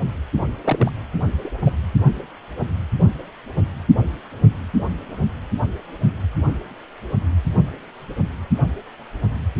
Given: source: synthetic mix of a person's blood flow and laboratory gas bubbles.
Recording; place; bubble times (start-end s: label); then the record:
Doppler ultrasound of blood flow; precordium
0.64-0.90 s: bubbles
1.44-1.51 s: bubbles
1.65-1.77 s: bubbles
From the record:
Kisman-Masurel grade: 122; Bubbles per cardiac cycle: 1 to 2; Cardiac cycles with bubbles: 10 to 50%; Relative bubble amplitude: moderate (0.250 to 0.450); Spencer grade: 2 (many but less than half of the cardiac periods contain bubble signals, singularly or in groups); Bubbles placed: anywhere in the cardiac cycle